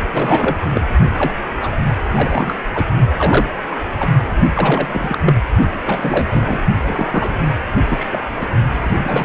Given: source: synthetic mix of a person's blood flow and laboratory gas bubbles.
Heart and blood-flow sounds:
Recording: Doppler ultrasound of blood flow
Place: precordium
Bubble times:
0.12-0.57 s: bubbles
0.73-0.81 s: bubbles
1.17-1.34 s: bubbles
1.61-1.68 s: bubbles
2.15-2.54 s: bubbles
2.74-2.85 s: bubbles
3.17-3.46 s: bubbles
3.70-3.77 s: bubbles
3.99-4.10 s: bubbles
4.54-5.19 s: bubbles
5.25-5.35 s: bubbles
5.85-6.61 s: bubbles
6.82-7.42 s: bubbles
7.89-8.23 s: bubbles
8.39-8.47 s: bubbles
8.83-9.25 s: bubbles
From the record:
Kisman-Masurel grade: 342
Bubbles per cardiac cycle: rolling drumbeat, 9 or more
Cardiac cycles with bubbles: 100%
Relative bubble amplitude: moderate (0.250 to 0.450)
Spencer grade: 3 (all of the cardiac periods contain showers or single bubble signals, but not dominating or overriding the cardiac motion signals)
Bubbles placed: only in the low amplitude regions of the cardiac cycle

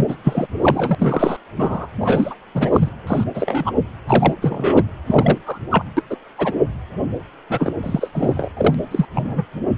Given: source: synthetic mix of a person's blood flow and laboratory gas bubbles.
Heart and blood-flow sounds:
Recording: Doppler ultrasound of blood flow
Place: precordium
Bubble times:
0.00-0.15 s: bubbles
0.24-0.46 s: bubbles
0.60-0.95 s: bubbles
0.98-1.37 s: bubbles
1.57-1.88 s: bubbles
2.00-2.35 s: bubbles
2.54-2.89 s: bubbles
3.06-3.24 s: bubbles
3.34-3.71 s: bubbles
4.07-4.34 s: bubbles
4.42-4.83 s: bubbles
5.07-5.42 s: bubbles
5.46-5.59 s: bubbles
5.70-5.84 s: bubbles
5.96-6.03 s: bubbles
6.10-6.17 s: bubbles
6.38-6.55 s: bubbles
7.50-7.73 s: bubbles
7.83-8.10 s: bubbles
8.14-8.49 s: bubbles
8.56-8.74 s: bubbles
8.91-9.05 s: bubbles
9.13-9.45 s: bubbles
From the record:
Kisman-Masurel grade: 243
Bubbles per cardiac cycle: several, 3 to 8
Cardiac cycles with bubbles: 100%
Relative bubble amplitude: loud (0.450 to 0.775)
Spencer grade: 3 (all of the cardiac periods contain showers or single bubble signals, but not dominating or overriding the cardiac motion signals)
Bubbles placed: anywhere in the cardiac cycle

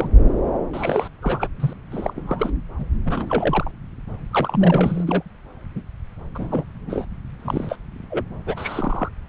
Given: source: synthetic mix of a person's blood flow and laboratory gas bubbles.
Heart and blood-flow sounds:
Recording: Doppler ultrasound of blood flow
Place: subclavian vein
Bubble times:
0.00-0.09 s: bubbles
0.73-1.08 s: bubbles
1.22-1.48 s: bubbles
1.60-1.73 s: bubbles
1.91-2.51 s: bubbles
2.79-2.86 s: bubbles
3.05-3.71 s: bubbles
4.31-5.04 s: bubbles
5.07-5.22 s: bubbles
5.75-5.82 s: bubbles
6.34-6.65 s: bubbles
6.79-7.05 s: bubbles
7.39-7.76 s: bubbles
8.10-8.24 s: bubbles
8.46-9.09 s: bubbles
From the record:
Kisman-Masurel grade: 232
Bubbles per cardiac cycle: several, 3 to 8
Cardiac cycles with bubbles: 50 to 99%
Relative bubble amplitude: moderate (0.250 to 0.450)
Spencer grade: 3 (all of the cardiac periods contain showers or single bubble signals, but not dominating or overriding the cardiac motion signals)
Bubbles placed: anywhere in the cardiac cycle

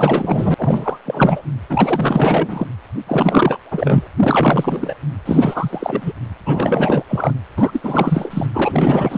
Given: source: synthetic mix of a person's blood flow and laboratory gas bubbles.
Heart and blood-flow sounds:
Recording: Doppler ultrasound of blood flow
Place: precordium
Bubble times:
0.00-0.97 s: bubbles
1.05-1.42 s: bubbles
1.69-2.67 s: bubbles
3.06-3.60 s: bubbles
3.71-4.08 s: bubbles
4.19-4.97 s: bubbles
5.25-6.12 s: bubbles
6.46-7.04 s: bubbles
7.08-7.33 s: bubbles
7.57-8.46 s: bubbles
8.53-9.18 s: bubbles
From the record:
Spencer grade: 4 (maximum detectable bubble signal sounding continuously throughout systole and diastole of every cardiac period, and overriding the amplitude of the normal cardiac signals)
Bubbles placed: anywhere in the cardiac cycle

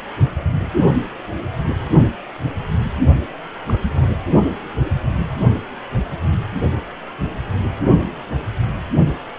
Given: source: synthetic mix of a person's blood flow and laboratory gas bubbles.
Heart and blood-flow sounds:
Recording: Doppler ultrasound of blood flow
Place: precordium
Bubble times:
3.67-3.80 s: bubbles
3.95-4.08 s: bubbles
From the record:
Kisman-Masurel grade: 211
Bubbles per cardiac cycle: several, 3 to 8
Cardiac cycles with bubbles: 1 to 10%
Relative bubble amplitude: barely perceptible (0.100 to 0.250)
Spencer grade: 1 (occasional bubble signal discernible with the cardiac motion signal, with majority of cardiac periods free of bubbles)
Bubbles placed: only in the low amplitude regions of the cardiac cycle

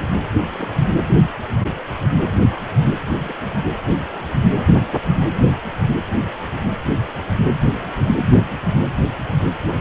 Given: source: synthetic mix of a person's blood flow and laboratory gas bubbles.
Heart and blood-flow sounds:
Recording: Doppler ultrasound of blood flow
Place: precordium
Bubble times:
0.57-0.69 s: bubbles
3.15-3.33 s: bubbles
3.54-3.65 s: bubbles
8.31-8.39 s: bubbles
From the record:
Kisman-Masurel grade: 121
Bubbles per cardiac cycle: 1 to 2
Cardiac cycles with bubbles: 10 to 50%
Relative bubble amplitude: barely perceptible (0.100 to 0.250)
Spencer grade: 2 (many but less than half of the cardiac periods contain bubble signals, singularly or in groups)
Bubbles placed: anywhere in the cardiac cycle

